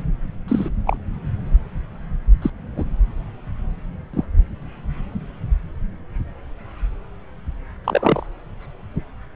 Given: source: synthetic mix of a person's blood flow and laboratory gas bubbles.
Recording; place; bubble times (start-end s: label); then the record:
Doppler ultrasound of blood flow; subclavian vein
0.48-0.68 s: bubbles
0.86-0.96 s: bubbles
2.42-2.50 s: bubbles
2.76-2.85 s: bubbles
4.13-4.24 s: bubbles
7.84-8.26 s: bubbles
From the record:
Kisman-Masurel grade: 122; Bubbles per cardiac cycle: 1 to 2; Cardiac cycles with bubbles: 10 to 50%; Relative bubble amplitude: moderate (0.250 to 0.450); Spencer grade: 2 (many but less than half of the cardiac periods contain bubble signals, singularly or in groups); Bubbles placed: anywhere in the cardiac cycle